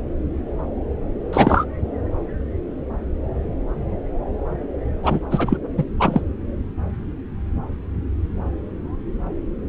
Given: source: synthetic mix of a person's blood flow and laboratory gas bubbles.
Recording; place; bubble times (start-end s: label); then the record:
Doppler ultrasound of blood flow; subclavian vein
1.33-1.65 s: bubbles
5.02-5.19 s: bubbles
5.30-5.57 s: bubbles
5.77-5.84 s: bubbles
5.99-6.21 s: bubbles
From the record:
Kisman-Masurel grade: 223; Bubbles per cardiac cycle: several, 3 to 8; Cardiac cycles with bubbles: 10 to 50%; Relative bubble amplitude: loud (0.450 to 0.775); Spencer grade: 2 (many but less than half of the cardiac periods contain bubble signals, singularly or in groups); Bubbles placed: anywhere in the cardiac cycle